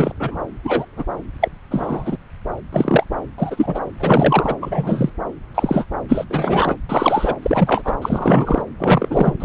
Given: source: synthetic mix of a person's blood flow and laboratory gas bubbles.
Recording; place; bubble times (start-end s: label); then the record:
Doppler ultrasound of blood flow; subclavian vein
0.00-0.12 s: bubbles
0.20-0.41 s: bubbles
0.64-0.85 s: bubbles
0.97-1.05 s: bubbles
1.41-1.49 s: bubbles
1.70-2.17 s: bubbles
2.72-3.03 s: bubbles
3.38-3.79 s: bubbles
3.99-4.56 s: bubbles
4.62-5.09 s: bubbles
5.54-5.85 s: bubbles
6.08-6.25 s: bubbles
6.29-6.76 s: bubbles
6.89-7.35 s: bubbles
7.42-7.82 s: bubbles
7.84-7.95 s: bubbles
8.02-8.62 s: bubbles
8.79-9.34 s: bubbles
9.40-9.45 s: bubbles
From the record:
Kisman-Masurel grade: 233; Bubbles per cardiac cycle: several, 3 to 8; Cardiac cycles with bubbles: 50 to 99%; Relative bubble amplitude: loud (0.450 to 0.775); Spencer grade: 3 (all of the cardiac periods contain showers or single bubble signals, but not dominating or overriding the cardiac motion signals); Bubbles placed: anywhere in the cardiac cycle